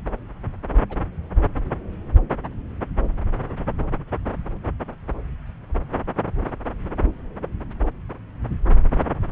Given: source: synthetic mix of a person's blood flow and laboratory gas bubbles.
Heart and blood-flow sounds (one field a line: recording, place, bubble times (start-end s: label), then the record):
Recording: Doppler ultrasound of blood flow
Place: subclavian vein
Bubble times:
0.89-1.02 s: bubbles
7.42-7.47 s: bubbles
From the record:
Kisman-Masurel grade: 121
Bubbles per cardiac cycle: 1 to 2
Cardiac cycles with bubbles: 10 to 50%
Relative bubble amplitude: barely perceptible (0.100 to 0.250)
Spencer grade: 2 (many but less than half of the cardiac periods contain bubble signals, singularly or in groups)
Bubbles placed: anywhere in the cardiac cycle